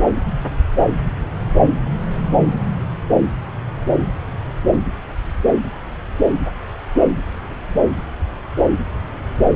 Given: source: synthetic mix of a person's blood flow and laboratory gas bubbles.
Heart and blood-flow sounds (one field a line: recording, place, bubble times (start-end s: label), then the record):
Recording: Doppler ultrasound of blood flow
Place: subclavian vein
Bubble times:
no bubbles
From the record:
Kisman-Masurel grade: 000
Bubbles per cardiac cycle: 0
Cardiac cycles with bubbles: 0%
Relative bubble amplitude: no bubbles discernible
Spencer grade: 0 (complete lack of bubble signals)